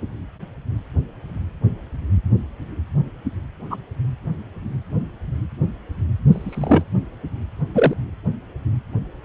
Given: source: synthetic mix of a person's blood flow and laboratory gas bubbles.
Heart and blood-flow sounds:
Doppler ultrasound of blood flow; precordium
3.70-3.76 s: bubbles
6.31-6.83 s: bubbles
7.74-7.94 s: bubbles
From the record:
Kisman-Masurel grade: 123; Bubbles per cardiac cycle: 1 to 2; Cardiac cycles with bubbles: 10 to 50%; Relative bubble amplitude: loud (0.450 to 0.775); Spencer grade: 2 (many but less than half of the cardiac periods contain bubble signals, singularly or in groups); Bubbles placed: anywhere in the cardiac cycle

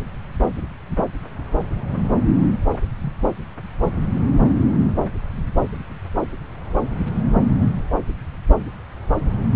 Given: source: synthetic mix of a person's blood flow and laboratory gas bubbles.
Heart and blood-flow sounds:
Doppler ultrasound of blood flow; subclavian vein
2.73-2.78 s: bubbles
3.01-3.13 s: bubbles
From the record:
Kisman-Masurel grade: 111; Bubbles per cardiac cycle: 1 to 2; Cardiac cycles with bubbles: 1 to 10%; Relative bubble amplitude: barely perceptible (0.100 to 0.250); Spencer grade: 1 (occasional bubble signal discernible with the cardiac motion signal, with majority of cardiac periods free of bubbles); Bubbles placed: anywhere in the cardiac cycle

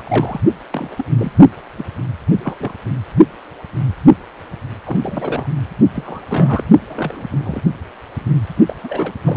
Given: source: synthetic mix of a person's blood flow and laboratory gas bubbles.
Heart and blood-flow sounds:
Doppler ultrasound of blood flow; precordium
0.00-0.02 s: bubbles
0.05-0.41 s: bubbles
0.71-0.95 s: bubbles
0.98-1.04 s: bubbles
1.18-1.32 s: bubbles
1.77-1.85 s: bubbles
2.44-2.71 s: bubbles
4.86-4.98 s: bubbles
5.02-5.46 s: bubbles
5.92-6.22 s: bubbles
6.28-6.64 s: bubbles
6.89-7.61 s: bubbles
8.66-8.76 s: bubbles
8.84-9.13 s: bubbles
9.26-9.37 s: bubbles
From the record:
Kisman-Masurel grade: 232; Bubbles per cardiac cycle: several, 3 to 8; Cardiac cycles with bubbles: 50 to 99%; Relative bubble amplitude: moderate (0.250 to 0.450); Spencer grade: 3 (all of the cardiac periods contain showers or single bubble signals, but not dominating or overriding the cardiac motion signals); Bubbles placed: only in the low amplitude regions of the cardiac cycle

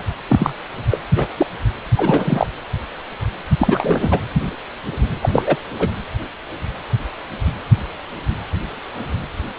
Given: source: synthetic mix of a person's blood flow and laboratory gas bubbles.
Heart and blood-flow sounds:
Doppler ultrasound of blood flow; precordium
0.00-0.03 s: bubbles
0.29-0.53 s: bubbles
0.90-1.00 s: bubbles
1.16-1.27 s: bubbles
1.37-1.46 s: bubbles
1.96-2.47 s: bubbles
3.59-4.20 s: bubbles
5.21-5.42 s: bubbles
5.46-5.57 s: bubbles
5.79-5.88 s: bubbles
From the record:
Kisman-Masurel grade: 223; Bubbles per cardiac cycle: several, 3 to 8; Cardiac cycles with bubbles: 10 to 50%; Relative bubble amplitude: loud (0.450 to 0.775); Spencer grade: 2 (many but less than half of the cardiac periods contain bubble signals, singularly or in groups); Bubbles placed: anywhere in the cardiac cycle

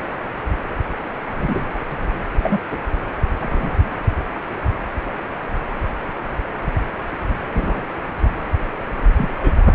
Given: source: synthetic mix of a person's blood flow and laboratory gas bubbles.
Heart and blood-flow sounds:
Doppler ultrasound of blood flow; precordium
1.37-1.61 s: bubbles
2.43-2.58 s: bubbles
2.71-2.79 s: bubbles
3.40-3.77 s: bubbles
7.54-7.87 s: bubbles
9.17-9.66 s: bubbles
From the record:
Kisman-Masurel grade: 122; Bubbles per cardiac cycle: 1 to 2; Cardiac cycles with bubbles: 10 to 50%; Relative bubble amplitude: moderate (0.250 to 0.450); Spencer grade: 2 (many but less than half of the cardiac periods contain bubble signals, singularly or in groups); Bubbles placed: anywhere in the cardiac cycle

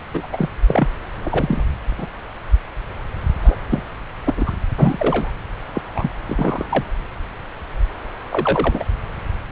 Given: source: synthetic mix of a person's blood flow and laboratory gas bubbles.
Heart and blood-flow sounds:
Doppler ultrasound of blood flow; subclavian vein
0.14-0.27 s: bubbles
0.32-0.49 s: bubbles
0.67-0.88 s: bubbles
1.25-1.63 s: bubbles
1.98-2.06 s: bubbles
3.42-3.56 s: bubbles
3.69-3.83 s: bubbles
4.24-4.54 s: bubbles
4.78-5.31 s: bubbles
5.74-5.82 s: bubbles
5.95-6.12 s: bubbles
6.27-6.88 s: bubbles
8.29-8.84 s: bubbles
From the record:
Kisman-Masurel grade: 232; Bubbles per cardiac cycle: several, 3 to 8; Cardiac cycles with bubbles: 50 to 99%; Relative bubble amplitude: moderate (0.250 to 0.450); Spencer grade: 3 (all of the cardiac periods contain showers or single bubble signals, but not dominating or overriding the cardiac motion signals); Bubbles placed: anywhere in the cardiac cycle

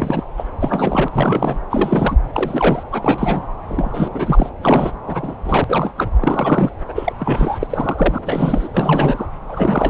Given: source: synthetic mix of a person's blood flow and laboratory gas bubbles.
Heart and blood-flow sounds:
Doppler ultrasound of blood flow; subclavian vein
0.00-0.33 s: bubbles
0.37-0.45 s: bubbles
0.60-1.08 s: bubbles
1.12-1.56 s: bubbles
1.70-2.17 s: bubbles
2.33-2.83 s: bubbles
2.92-3.42 s: bubbles
3.68-4.50 s: bubbles
4.61-4.92 s: bubbles
5.06-5.34 s: bubbles
5.44-5.64 s: bubbles
5.68-5.92 s: bubbles
5.97-6.10 s: bubbles
6.18-6.71 s: bubbles
6.88-7.12 s: bubbles
7.19-7.67 s: bubbles
7.70-8.19 s: bubbles
8.22-8.68 s: bubbles
8.74-9.26 s: bubbles
9.48-9.90 s: bubbles
From the record:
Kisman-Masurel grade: 342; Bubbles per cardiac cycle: rolling drumbeat, 9 or more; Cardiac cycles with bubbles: 100%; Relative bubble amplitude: moderate (0.250 to 0.450); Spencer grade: 3 (all of the cardiac periods contain showers or single bubble signals, but not dominating or overriding the cardiac motion signals); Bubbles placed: anywhere in the cardiac cycle

